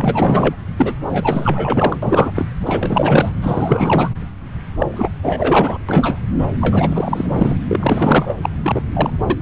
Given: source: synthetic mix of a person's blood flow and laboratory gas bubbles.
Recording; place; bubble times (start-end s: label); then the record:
Doppler ultrasound of blood flow; subclavian vein
0.00-0.55 s: bubbles
0.76-0.94 s: bubbles
1.07-1.97 s: bubbles
2.02-2.31 s: bubbles
2.36-2.46 s: bubbles
2.59-3.32 s: bubbles
3.42-4.10 s: bubbles
4.78-5.11 s: bubbles
5.23-5.78 s: bubbles
5.89-6.26 s: bubbles
6.61-7.56 s: bubbles
7.68-8.35 s: bubbles
8.43-8.50 s: bubbles
8.62-8.82 s: bubbles
8.93-9.10 s: bubbles
9.27-9.41 s: bubbles
From the record:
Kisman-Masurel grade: 444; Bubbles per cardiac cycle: continuous sound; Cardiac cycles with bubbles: 100%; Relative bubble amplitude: maximal (0.775 to 0.999); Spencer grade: 4 (maximum detectable bubble signal sounding continuously throughout systole and diastole of every cardiac period, and overriding the amplitude of the normal cardiac signals); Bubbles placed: anywhere in the cardiac cycle